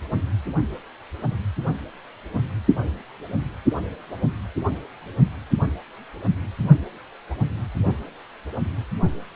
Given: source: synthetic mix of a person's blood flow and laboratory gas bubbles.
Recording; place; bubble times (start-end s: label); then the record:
Doppler ultrasound of blood flow; precordium
no bubbles
From the record:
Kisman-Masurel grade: 000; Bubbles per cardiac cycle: 0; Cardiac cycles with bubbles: 0%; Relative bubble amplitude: no bubbles discernible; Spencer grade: 0 (complete lack of bubble signals)